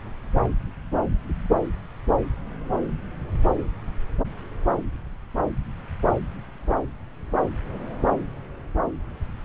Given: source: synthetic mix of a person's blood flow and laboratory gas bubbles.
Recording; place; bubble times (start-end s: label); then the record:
Doppler ultrasound of blood flow; subclavian vein
no bubbles
From the record:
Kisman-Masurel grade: 000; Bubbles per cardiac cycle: 0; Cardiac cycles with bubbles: 0%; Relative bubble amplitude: no bubbles discernible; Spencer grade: 0 (complete lack of bubble signals)